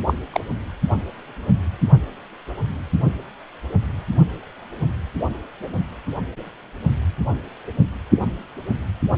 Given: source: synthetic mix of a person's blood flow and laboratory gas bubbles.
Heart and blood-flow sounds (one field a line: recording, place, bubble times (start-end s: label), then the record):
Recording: Doppler ultrasound of blood flow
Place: precordium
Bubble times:
0.07-0.14 s: bubbles
0.33-0.41 s: bubbles
From the record:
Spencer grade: 1 (occasional bubble signal discernible with the cardiac motion signal, with majority of cardiac periods free of bubbles)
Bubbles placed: only in the low amplitude regions of the cardiac cycle